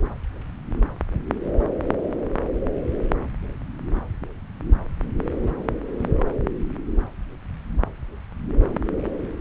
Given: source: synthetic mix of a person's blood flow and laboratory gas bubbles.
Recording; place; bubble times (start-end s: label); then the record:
Doppler ultrasound of blood flow; subclavian vein
5.40-5.65 s: bubbles
5.97-6.23 s: bubbles
From the record:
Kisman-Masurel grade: 211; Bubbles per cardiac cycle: several, 3 to 8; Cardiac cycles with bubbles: 1 to 10%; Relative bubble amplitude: barely perceptible (0.100 to 0.250); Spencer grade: 1 (occasional bubble signal discernible with the cardiac motion signal, with majority of cardiac periods free of bubbles); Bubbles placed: anywhere in the cardiac cycle